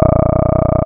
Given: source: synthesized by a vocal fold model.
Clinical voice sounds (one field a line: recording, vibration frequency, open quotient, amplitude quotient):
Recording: sustained vowel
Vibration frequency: 30 Hz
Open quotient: 0.2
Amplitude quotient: 1.2